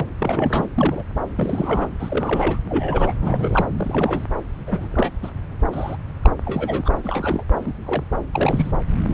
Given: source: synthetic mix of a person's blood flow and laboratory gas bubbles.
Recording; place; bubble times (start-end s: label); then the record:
Doppler ultrasound of blood flow; subclavian vein
0.00-0.06 s: bubbles
0.20-0.67 s: bubbles
0.75-1.03 s: bubbles
1.38-1.87 s: bubbles
1.99-2.59 s: bubbles
2.69-3.12 s: bubbles
3.21-3.66 s: bubbles
3.78-4.26 s: bubbles
4.67-4.88 s: bubbles
4.91-5.09 s: bubbles
5.22-5.31 s: bubbles
5.71-5.96 s: bubbles
6.24-6.30 s: bubbles
6.45-6.97 s: bubbles
7.04-7.43 s: bubbles
7.59-7.73 s: bubbles
7.86-8.03 s: bubbles
8.11-8.16 s: bubbles
8.33-8.71 s: bubbles
From the record:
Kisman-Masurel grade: 242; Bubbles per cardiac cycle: several, 3 to 8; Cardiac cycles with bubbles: 100%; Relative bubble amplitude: moderate (0.250 to 0.450); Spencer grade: 3 (all of the cardiac periods contain showers or single bubble signals, but not dominating or overriding the cardiac motion signals); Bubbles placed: anywhere in the cardiac cycle